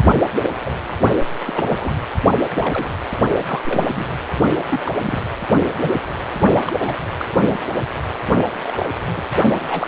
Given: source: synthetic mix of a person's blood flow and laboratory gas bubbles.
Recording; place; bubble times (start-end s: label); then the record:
Doppler ultrasound of blood flow; precordium
0.43-0.50 s: bubbles
0.64-0.70 s: bubbles
0.83-0.97 s: bubbles
1.45-1.93 s: bubbles
2.54-2.94 s: bubbles
3.46-3.84 s: bubbles
3.90-4.06 s: bubbles
4.69-4.80 s: bubbles
4.84-4.92 s: bubbles
5.03-5.21 s: bubbles
5.82-5.91 s: bubbles
6.67-6.72 s: bubbles
6.79-6.95 s: bubbles
7.17-7.25 s: bubbles
7.50-7.58 s: bubbles
8.67-8.88 s: bubbles
9.17-9.22 s: bubbles
9.68-9.88 s: bubbles
From the record:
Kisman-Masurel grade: 242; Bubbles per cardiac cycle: several, 3 to 8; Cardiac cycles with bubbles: 100%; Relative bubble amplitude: moderate (0.250 to 0.450); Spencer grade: 3 (all of the cardiac periods contain showers or single bubble signals, but not dominating or overriding the cardiac motion signals); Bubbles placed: only in the low amplitude regions of the cardiac cycle